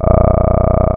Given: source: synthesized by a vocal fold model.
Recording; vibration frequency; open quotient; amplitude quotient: sustained vowel; 30 Hz; 0.3; 1.3